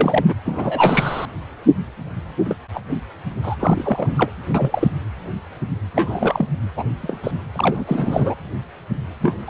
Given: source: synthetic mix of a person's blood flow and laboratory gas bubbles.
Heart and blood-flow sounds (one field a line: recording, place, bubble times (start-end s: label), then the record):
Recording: Doppler ultrasound of blood flow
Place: precordium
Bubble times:
0.00-0.25 s: bubbles
0.28-0.34 s: bubbles
0.45-1.26 s: bubbles
2.46-2.55 s: bubbles
2.73-2.81 s: bubbles
3.43-3.56 s: bubbles
3.59-4.31 s: bubbles
4.54-4.88 s: bubbles
5.95-6.46 s: bubbles
6.76-6.84 s: bubbles
7.02-7.18 s: bubbles
7.23-7.31 s: bubbles
7.55-7.84 s: bubbles
7.87-8.34 s: bubbles
9.21-9.34 s: bubbles
9.47-9.50 s: bubbles
From the record:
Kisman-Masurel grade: 232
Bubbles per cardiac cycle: several, 3 to 8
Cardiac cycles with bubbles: 50 to 99%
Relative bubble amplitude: moderate (0.250 to 0.450)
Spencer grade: 3 (all of the cardiac periods contain showers or single bubble signals, but not dominating or overriding the cardiac motion signals)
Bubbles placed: anywhere in the cardiac cycle